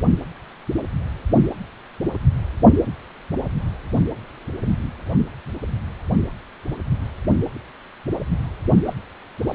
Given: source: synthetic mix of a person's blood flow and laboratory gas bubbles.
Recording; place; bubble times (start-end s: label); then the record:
Doppler ultrasound of blood flow; precordium
8.85-8.93 s: bubbles
9.47-9.55 s: bubbles
From the record:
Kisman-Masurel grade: 111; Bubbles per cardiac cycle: 1 to 2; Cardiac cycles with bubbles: 1 to 10%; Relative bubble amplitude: barely perceptible (0.100 to 0.250); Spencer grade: 1 (occasional bubble signal discernible with the cardiac motion signal, with majority of cardiac periods free of bubbles); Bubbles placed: only in the low amplitude regions of the cardiac cycle